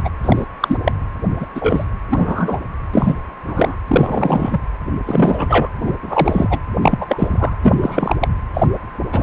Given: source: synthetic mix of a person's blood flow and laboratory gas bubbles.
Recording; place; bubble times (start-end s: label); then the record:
Doppler ultrasound of blood flow; precordium
0.04-0.09 s: bubbles
0.22-0.46 s: bubbles
0.60-0.77 s: bubbles
0.84-0.92 s: bubbles
1.40-1.46 s: bubbles
1.55-1.84 s: bubbles
2.08-2.60 s: bubbles
2.94-3.15 s: bubbles
3.46-3.75 s: bubbles
3.88-4.61 s: bubbles
5.05-5.69 s: bubbles
5.80-5.94 s: bubbles
6.03-6.59 s: bubbles
6.79-7.55 s: bubbles
7.62-8.15 s: bubbles
8.21-8.28 s: bubbles
8.53-8.67 s: bubbles
9.12-9.23 s: bubbles
From the record:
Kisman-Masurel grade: 243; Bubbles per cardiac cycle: several, 3 to 8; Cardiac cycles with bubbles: 100%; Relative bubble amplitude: loud (0.450 to 0.775); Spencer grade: 3 (all of the cardiac periods contain showers or single bubble signals, but not dominating or overriding the cardiac motion signals); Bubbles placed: anywhere in the cardiac cycle